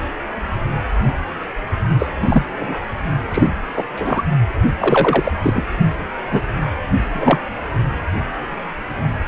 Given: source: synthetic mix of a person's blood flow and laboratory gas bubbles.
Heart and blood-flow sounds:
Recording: Doppler ultrasound of blood flow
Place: precordium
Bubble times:
1.99-2.09 s: bubbles
2.21-2.43 s: bubbles
2.53-2.80 s: bubbles
3.30-3.48 s: bubbles
3.77-3.83 s: bubbles
3.96-4.23 s: bubbles
4.78-5.32 s: bubbles
5.42-5.65 s: bubbles
6.32-6.42 s: bubbles
7.13-7.39 s: bubbles
From the record:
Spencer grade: 3 (all of the cardiac periods contain showers or single bubble signals, but not dominating or overriding the cardiac motion signals)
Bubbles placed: only in the low amplitude regions of the cardiac cycle

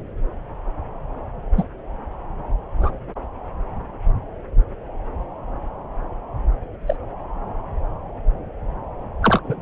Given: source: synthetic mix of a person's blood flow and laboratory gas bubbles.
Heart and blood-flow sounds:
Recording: Doppler ultrasound of blood flow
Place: subclavian vein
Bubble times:
1.56-1.66 s: bubbles
2.80-2.90 s: bubbles
6.87-6.96 s: bubbles
9.22-9.41 s: bubbles
9.44-9.62 s: bubbles
From the record:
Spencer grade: 2 (many but less than half of the cardiac periods contain bubble signals, singularly or in groups)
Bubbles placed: anywhere in the cardiac cycle

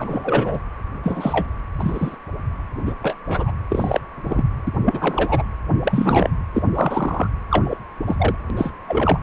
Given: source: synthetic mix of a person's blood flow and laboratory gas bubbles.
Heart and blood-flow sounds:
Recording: Doppler ultrasound of blood flow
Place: precordium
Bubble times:
0.00-0.59 s: bubbles
1.03-1.47 s: bubbles
1.78-2.16 s: bubbles
2.85-2.94 s: bubbles
3.02-3.16 s: bubbles
3.27-3.51 s: bubbles
3.69-4.00 s: bubbles
4.24-4.43 s: bubbles
4.67-4.72 s: bubbles
4.85-5.43 s: bubbles
5.83-6.30 s: bubbles
6.54-6.62 s: bubbles
6.74-7.27 s: bubbles
7.50-7.77 s: bubbles
8.06-8.35 s: bubbles
8.55-8.72 s: bubbles
8.88-9.20 s: bubbles
From the record:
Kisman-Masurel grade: 243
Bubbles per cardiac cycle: several, 3 to 8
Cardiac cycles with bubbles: 100%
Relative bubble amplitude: loud (0.450 to 0.775)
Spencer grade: 3 (all of the cardiac periods contain showers or single bubble signals, but not dominating or overriding the cardiac motion signals)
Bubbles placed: anywhere in the cardiac cycle

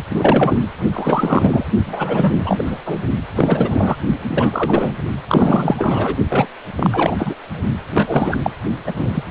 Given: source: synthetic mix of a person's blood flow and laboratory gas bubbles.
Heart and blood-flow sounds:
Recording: Doppler ultrasound of blood flow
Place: precordium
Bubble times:
0.10-0.57 s: bubbles
0.93-1.64 s: bubbles
1.86-2.63 s: bubbles
2.66-2.79 s: bubbles
2.86-2.99 s: bubbles
3.35-3.96 s: bubbles
4.28-4.92 s: bubbles
5.27-6.17 s: bubbles
6.29-6.46 s: bubbles
6.75-7.34 s: bubbles
7.94-8.38 s: bubbles
8.42-8.50 s: bubbles
8.87-8.91 s: bubbles
8.95-9.23 s: bubbles
From the record:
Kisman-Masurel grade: 343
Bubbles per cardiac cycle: rolling drumbeat, 9 or more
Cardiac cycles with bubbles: 100%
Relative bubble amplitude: loud (0.450 to 0.775)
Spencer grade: 3 (all of the cardiac periods contain showers or single bubble signals, but not dominating or overriding the cardiac motion signals)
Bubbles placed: only in the low amplitude regions of the cardiac cycle

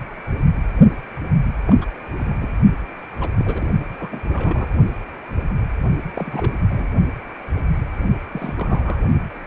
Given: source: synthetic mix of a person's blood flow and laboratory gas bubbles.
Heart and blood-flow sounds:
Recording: Doppler ultrasound of blood flow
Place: precordium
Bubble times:
1.66-1.75 s: bubbles
1.81-1.87 s: bubbles
2.20-2.25 s: bubbles
2.29-2.53 s: bubbles
3.19-3.31 s: bubbles
3.39-3.69 s: bubbles
3.98-4.09 s: bubbles
4.12-4.20 s: bubbles
4.32-4.75 s: bubbles
6.16-6.53 s: bubbles
6.69-6.92 s: bubbles
8.31-9.01 s: bubbles
From the record:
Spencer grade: 2 (many but less than half of the cardiac periods contain bubble signals, singularly or in groups)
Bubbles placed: only in the low amplitude regions of the cardiac cycle

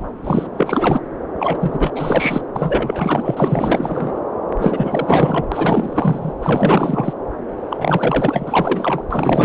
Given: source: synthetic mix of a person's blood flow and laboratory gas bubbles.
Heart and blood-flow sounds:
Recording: Doppler ultrasound of blood flow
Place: subclavian vein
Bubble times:
0.00-0.05 s: bubbles
0.24-0.47 s: bubbles
0.54-1.01 s: bubbles
1.38-1.93 s: bubbles
1.95-2.41 s: bubbles
2.55-4.21 s: bubbles
4.56-5.45 s: bubbles
5.52-6.33 s: bubbles
6.41-7.14 s: bubbles
7.70-9.04 s: bubbles
9.10-9.45 s: bubbles
From the record:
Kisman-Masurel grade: 444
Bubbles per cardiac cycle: continuous sound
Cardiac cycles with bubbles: 100%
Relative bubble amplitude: maximal (0.775 to 0.999)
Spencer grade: 4 (maximum detectable bubble signal sounding continuously throughout systole and diastole of every cardiac period, and overriding the amplitude of the normal cardiac signals)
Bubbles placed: anywhere in the cardiac cycle

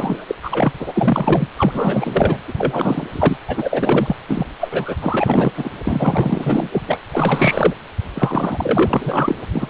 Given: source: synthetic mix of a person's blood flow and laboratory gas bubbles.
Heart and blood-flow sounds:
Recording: Doppler ultrasound of blood flow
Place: precordium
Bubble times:
0.00-0.36 s: bubbles
0.43-0.72 s: bubbles
0.80-1.47 s: bubbles
1.57-2.38 s: bubbles
2.48-2.53 s: bubbles
2.58-3.07 s: bubbles
3.12-3.37 s: bubbles
3.48-4.16 s: bubbles
4.28-4.46 s: bubbles
4.60-4.96 s: bubbles
5.00-5.53 s: bubbles
5.56-5.71 s: bubbles
5.85-6.68 s: bubbles
6.71-6.82 s: bubbles
6.87-6.99 s: bubbles
7.12-7.75 s: bubbles
8.14-9.36 s: bubbles
9.53-9.70 s: bubbles
From the record:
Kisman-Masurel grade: 444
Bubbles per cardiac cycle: continuous sound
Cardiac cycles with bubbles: 100%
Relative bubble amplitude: maximal (0.775 to 0.999)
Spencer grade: 4 (maximum detectable bubble signal sounding continuously throughout systole and diastole of every cardiac period, and overriding the amplitude of the normal cardiac signals)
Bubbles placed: anywhere in the cardiac cycle

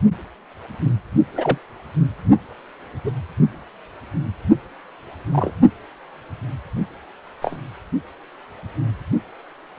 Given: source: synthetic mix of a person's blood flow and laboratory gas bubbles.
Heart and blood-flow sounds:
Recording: Doppler ultrasound of blood flow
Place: precordium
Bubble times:
1.34-1.58 s: bubbles
3.04-3.11 s: bubbles
5.32-5.51 s: bubbles
7.42-7.57 s: bubbles
From the record:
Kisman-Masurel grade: 122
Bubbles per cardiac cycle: 1 to 2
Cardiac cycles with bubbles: 10 to 50%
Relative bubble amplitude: moderate (0.250 to 0.450)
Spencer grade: 2 (many but less than half of the cardiac periods contain bubble signals, singularly or in groups)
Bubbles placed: only in the low amplitude regions of the cardiac cycle

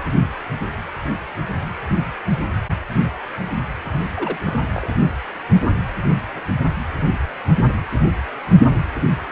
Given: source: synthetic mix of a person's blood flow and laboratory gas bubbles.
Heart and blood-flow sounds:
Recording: Doppler ultrasound of blood flow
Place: precordium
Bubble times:
4.15-4.37 s: bubbles
4.45-4.56 s: bubbles
4.73-4.93 s: bubbles
From the record:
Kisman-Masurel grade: 222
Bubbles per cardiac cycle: several, 3 to 8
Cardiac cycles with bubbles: 10 to 50%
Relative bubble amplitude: moderate (0.250 to 0.450)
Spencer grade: 2 (many but less than half of the cardiac periods contain bubble signals, singularly or in groups)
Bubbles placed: anywhere in the cardiac cycle

